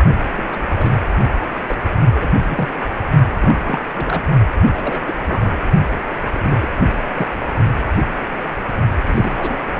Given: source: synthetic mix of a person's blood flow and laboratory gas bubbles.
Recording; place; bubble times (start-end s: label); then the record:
Doppler ultrasound of blood flow; precordium
0.36-0.44 s: bubbles
0.52-0.66 s: bubbles
0.77-0.97 s: bubbles
1.67-1.77 s: bubbles
1.89-1.93 s: bubbles
2.14-2.29 s: bubbles
2.50-2.69 s: bubbles
3.41-3.81 s: bubbles
3.96-4.23 s: bubbles
4.73-5.00 s: bubbles
5.08-5.13 s: bubbles
5.23-5.57 s: bubbles
6.33-6.67 s: bubbles
7.13-7.28 s: bubbles
9.06-9.62 s: bubbles
9.74-9.80 s: bubbles
From the record:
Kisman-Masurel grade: 232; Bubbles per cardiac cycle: several, 3 to 8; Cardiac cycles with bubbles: 50 to 99%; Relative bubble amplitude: moderate (0.250 to 0.450); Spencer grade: 3 (all of the cardiac periods contain showers or single bubble signals, but not dominating or overriding the cardiac motion signals); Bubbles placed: only in the low amplitude regions of the cardiac cycle